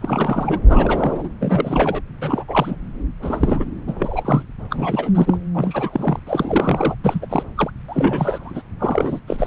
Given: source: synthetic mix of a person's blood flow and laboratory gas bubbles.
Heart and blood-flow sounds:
Doppler ultrasound of blood flow; subclavian vein
0.01-0.59 s: bubbles
0.68-1.29 s: bubbles
1.40-2.02 s: bubbles
2.21-2.44 s: bubbles
2.48-2.77 s: bubbles
3.22-3.65 s: bubbles
3.86-4.43 s: bubbles
4.71-5.12 s: bubbles
5.15-5.38 s: bubbles
5.54-6.20 s: bubbles
6.27-6.95 s: bubbles
7.04-7.27 s: bubbles
7.29-7.43 s: bubbles
7.56-7.71 s: bubbles
7.88-8.62 s: bubbles
8.79-9.21 s: bubbles
9.28-9.47 s: bubbles
From the record:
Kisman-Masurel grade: 342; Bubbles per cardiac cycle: rolling drumbeat, 9 or more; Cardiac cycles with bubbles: 100%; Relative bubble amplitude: moderate (0.250 to 0.450); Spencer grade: 3 (all of the cardiac periods contain showers or single bubble signals, but not dominating or overriding the cardiac motion signals); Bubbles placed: anywhere in the cardiac cycle

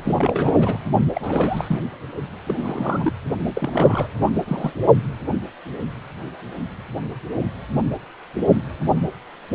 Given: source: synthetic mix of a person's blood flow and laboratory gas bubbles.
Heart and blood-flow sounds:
Doppler ultrasound of blood flow; precordium
0.00-0.55 s: bubbles
0.58-0.78 s: bubbles
1.15-1.79 s: bubbles
2.46-3.12 s: bubbles
3.55-4.08 s: bubbles
4.25-4.30 s: bubbles
4.47-4.74 s: bubbles
From the record:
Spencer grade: 3 (all of the cardiac periods contain showers or single bubble signals, but not dominating or overriding the cardiac motion signals); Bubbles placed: only in the low amplitude regions of the cardiac cycle

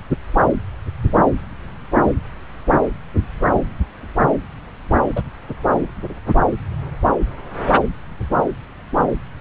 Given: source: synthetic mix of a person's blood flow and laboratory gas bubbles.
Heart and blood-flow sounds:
Doppler ultrasound of blood flow; subclavian vein
5.15-5.21 s: bubbles
From the record:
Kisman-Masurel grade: 113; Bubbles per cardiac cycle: 1 to 2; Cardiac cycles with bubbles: 1 to 10%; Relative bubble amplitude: loud (0.450 to 0.775); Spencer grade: 1 (occasional bubble signal discernible with the cardiac motion signal, with majority of cardiac periods free of bubbles); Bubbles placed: anywhere in the cardiac cycle

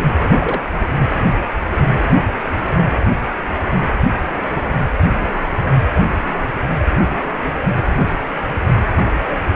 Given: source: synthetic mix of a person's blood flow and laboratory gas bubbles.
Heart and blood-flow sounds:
Doppler ultrasound of blood flow; precordium
0.40-0.62 s: bubbles
From the record:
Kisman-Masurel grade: 112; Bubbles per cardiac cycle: 1 to 2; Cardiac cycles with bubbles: 1 to 10%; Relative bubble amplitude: moderate (0.250 to 0.450); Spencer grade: 1 (occasional bubble signal discernible with the cardiac motion signal, with majority of cardiac periods free of bubbles); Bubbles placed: anywhere in the cardiac cycle

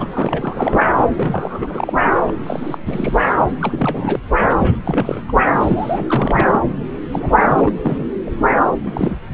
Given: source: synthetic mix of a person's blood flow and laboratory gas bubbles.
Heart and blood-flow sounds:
Doppler ultrasound of blood flow; subclavian vein
0.00-0.08 s: bubbles
0.13-0.88 s: bubbles
1.09-1.93 s: bubbles
2.27-2.31 s: bubbles
2.43-2.78 s: bubbles
2.85-3.34 s: bubbles
3.60-4.19 s: bubbles
4.39-4.77 s: bubbles
4.84-5.22 s: bubbles
5.28-5.32 s: bubbles
5.59-6.59 s: bubbles
7.11-7.42 s: bubbles
7.48-7.75 s: bubbles
7.82-8.04 s: bubbles
8.26-8.31 s: bubbles
8.84-9.15 s: bubbles
From the record:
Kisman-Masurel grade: 342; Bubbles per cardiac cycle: rolling drumbeat, 9 or more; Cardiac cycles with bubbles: 100%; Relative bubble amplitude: moderate (0.250 to 0.450); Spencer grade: 3 (all of the cardiac periods contain showers or single bubble signals, but not dominating or overriding the cardiac motion signals); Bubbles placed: anywhere in the cardiac cycle

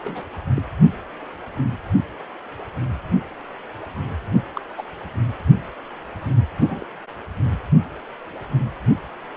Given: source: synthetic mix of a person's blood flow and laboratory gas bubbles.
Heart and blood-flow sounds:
Doppler ultrasound of blood flow; precordium
0.04-0.25 s: bubbles
0.55-0.62 s: bubbles
4.54-4.61 s: bubbles
4.78-4.82 s: bubbles
6.59-6.85 s: bubbles
From the record:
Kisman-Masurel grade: 121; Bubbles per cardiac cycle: 1 to 2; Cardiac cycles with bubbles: 10 to 50%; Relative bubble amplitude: barely perceptible (0.100 to 0.250); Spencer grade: 2 (many but less than half of the cardiac periods contain bubble signals, singularly or in groups); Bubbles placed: only in the low amplitude regions of the cardiac cycle

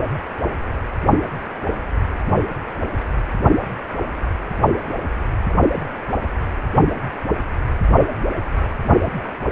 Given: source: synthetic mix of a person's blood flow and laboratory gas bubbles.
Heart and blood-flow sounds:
Doppler ultrasound of blood flow; precordium
no bubbles
From the record:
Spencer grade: 0 (complete lack of bubble signals)

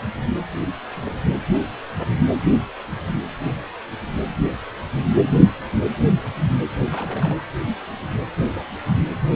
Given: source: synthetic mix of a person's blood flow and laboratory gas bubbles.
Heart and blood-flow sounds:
Doppler ultrasound of blood flow; precordium
0.92-1.13 s: bubbles
3.44-3.57 s: bubbles
4.38-4.50 s: bubbles
6.91-7.35 s: bubbles
8.54-8.64 s: bubbles
From the record:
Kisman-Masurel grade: 121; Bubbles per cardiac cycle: 1 to 2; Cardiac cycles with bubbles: 10 to 50%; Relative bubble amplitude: barely perceptible (0.100 to 0.250); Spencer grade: 2 (many but less than half of the cardiac periods contain bubble signals, singularly or in groups); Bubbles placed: anywhere in the cardiac cycle

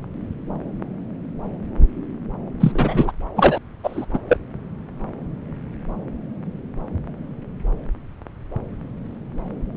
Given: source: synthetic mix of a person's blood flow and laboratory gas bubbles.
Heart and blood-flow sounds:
Doppler ultrasound of blood flow; subclavian vein
2.60-3.12 s: bubbles
3.36-3.58 s: bubbles
3.83-4.05 s: bubbles
4.13-4.19 s: bubbles
4.29-4.38 s: bubbles
From the record:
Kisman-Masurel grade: 223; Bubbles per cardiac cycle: several, 3 to 8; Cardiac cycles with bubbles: 10 to 50%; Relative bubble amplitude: loud (0.450 to 0.775); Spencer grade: 2 (many but less than half of the cardiac periods contain bubble signals, singularly or in groups); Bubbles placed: anywhere in the cardiac cycle

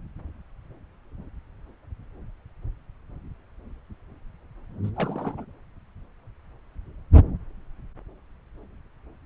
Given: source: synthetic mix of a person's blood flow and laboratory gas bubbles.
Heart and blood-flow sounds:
Doppler ultrasound of blood flow; subclavian vein
4.83-4.89 s: bubbles
4.96-5.45 s: bubbles
From the record:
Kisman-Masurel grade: 211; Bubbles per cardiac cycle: several, 3 to 8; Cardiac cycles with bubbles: 1 to 10%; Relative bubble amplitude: barely perceptible (0.100 to 0.250); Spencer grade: 1 (occasional bubble signal discernible with the cardiac motion signal, with majority of cardiac periods free of bubbles); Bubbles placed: anywhere in the cardiac cycle

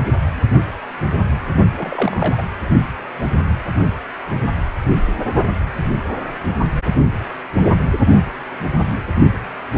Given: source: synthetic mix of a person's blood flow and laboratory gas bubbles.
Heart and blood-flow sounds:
Doppler ultrasound of blood flow; precordium
1.75-2.42 s: bubbles
From the record:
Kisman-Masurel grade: 212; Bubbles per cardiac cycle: several, 3 to 8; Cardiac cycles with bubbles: 1 to 10%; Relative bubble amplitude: moderate (0.250 to 0.450); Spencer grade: 1 (occasional bubble signal discernible with the cardiac motion signal, with majority of cardiac periods free of bubbles); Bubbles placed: only in the low amplitude regions of the cardiac cycle

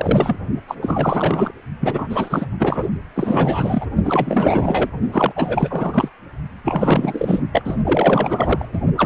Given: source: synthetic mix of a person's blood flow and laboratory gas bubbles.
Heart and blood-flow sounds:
Doppler ultrasound of blood flow; precordium
0.00-0.37 s: bubbles
0.68-0.76 s: bubbles
0.82-1.51 s: bubbles
1.80-2.46 s: bubbles
2.58-2.88 s: bubbles
3.14-3.87 s: bubbles
4.03-4.90 s: bubbles
5.12-5.33 s: bubbles
5.36-6.09 s: bubbles
6.64-7.40 s: bubbles
7.53-7.76 s: bubbles
7.84-8.65 s: bubbles
8.73-8.79 s: bubbles
8.97-9.06 s: bubbles
From the record:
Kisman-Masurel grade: 444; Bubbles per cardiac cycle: continuous sound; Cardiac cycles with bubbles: 100%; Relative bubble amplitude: maximal (0.775 to 0.999); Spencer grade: 4 (maximum detectable bubble signal sounding continuously throughout systole and diastole of every cardiac period, and overriding the amplitude of the normal cardiac signals); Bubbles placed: only in the low amplitude regions of the cardiac cycle

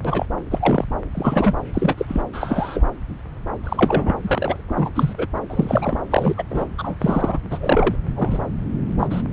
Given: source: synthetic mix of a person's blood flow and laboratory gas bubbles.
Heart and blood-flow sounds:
Doppler ultrasound of blood flow; subclavian vein
0.04-0.26 s: bubbles
0.50-0.85 s: bubbles
1.14-1.55 s: bubbles
1.74-1.95 s: bubbles
1.97-2.21 s: bubbles
2.33-2.85 s: bubbles
3.64-4.14 s: bubbles
4.24-4.61 s: bubbles
4.67-4.90 s: bubbles
4.94-5.13 s: bubbles
5.17-5.27 s: bubbles
5.50-6.01 s: bubbles
6.10-6.34 s: bubbles
6.37-6.43 s: bubbles
6.50-6.65 s: bubbles
6.78-6.96 s: bubbles
7.00-7.38 s: bubbles
7.50-7.96 s: bubbles
8.06-8.46 s: bubbles
8.99-9.07 s: bubbles
9.10-9.22 s: bubbles
From the record:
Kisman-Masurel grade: 243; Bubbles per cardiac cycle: several, 3 to 8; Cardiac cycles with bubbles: 100%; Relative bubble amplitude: loud (0.450 to 0.775); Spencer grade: 3 (all of the cardiac periods contain showers or single bubble signals, but not dominating or overriding the cardiac motion signals); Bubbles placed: anywhere in the cardiac cycle

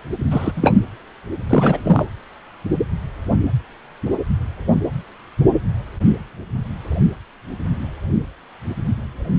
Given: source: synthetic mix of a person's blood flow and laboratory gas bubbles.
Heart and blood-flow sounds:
Doppler ultrasound of blood flow; precordium
0.30-0.52 s: bubbles
0.54-0.79 s: bubbles
1.49-1.78 s: bubbles
1.84-2.06 s: bubbles
From the record:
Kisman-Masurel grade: 223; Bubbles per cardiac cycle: several, 3 to 8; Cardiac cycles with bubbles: 10 to 50%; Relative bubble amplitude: loud (0.450 to 0.775); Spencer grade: 2 (many but less than half of the cardiac periods contain bubble signals, singularly or in groups); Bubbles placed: anywhere in the cardiac cycle

